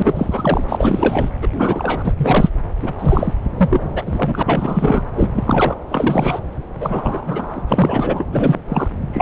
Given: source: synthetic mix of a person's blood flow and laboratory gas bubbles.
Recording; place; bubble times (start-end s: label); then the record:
Doppler ultrasound of blood flow; subclavian vein
0.00-0.63 s: bubbles
0.68-1.30 s: bubbles
1.41-1.48 s: bubbles
1.51-2.13 s: bubbles
2.17-2.49 s: bubbles
2.82-2.92 s: bubbles
2.98-3.33 s: bubbles
3.56-4.43 s: bubbles
4.46-5.03 s: bubbles
5.15-5.75 s: bubbles
5.89-6.40 s: bubbles
6.79-7.61 s: bubbles
7.68-8.24 s: bubbles
8.31-8.60 s: bubbles
8.68-8.88 s: bubbles
9.11-9.22 s: bubbles
From the record:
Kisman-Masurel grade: 343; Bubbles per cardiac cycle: rolling drumbeat, 9 or more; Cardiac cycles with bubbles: 100%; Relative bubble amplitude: loud (0.450 to 0.775); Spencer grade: 3 (all of the cardiac periods contain showers or single bubble signals, but not dominating or overriding the cardiac motion signals); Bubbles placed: anywhere in the cardiac cycle